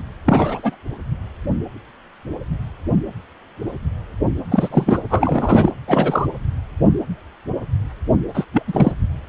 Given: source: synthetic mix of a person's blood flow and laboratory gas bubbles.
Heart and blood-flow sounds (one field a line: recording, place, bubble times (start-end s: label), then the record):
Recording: Doppler ultrasound of blood flow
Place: precordium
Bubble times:
0.00-0.02 s: bubbles
0.26-0.76 s: bubbles
4.51-4.99 s: bubbles
5.09-5.72 s: bubbles
5.88-6.27 s: bubbles
8.34-8.45 s: bubbles
8.52-8.62 s: bubbles
8.67-8.92 s: bubbles
From the record:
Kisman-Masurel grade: 233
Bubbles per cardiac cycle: several, 3 to 8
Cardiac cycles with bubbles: 50 to 99%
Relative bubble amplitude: loud (0.450 to 0.775)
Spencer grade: 3 (all of the cardiac periods contain showers or single bubble signals, but not dominating or overriding the cardiac motion signals)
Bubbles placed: anywhere in the cardiac cycle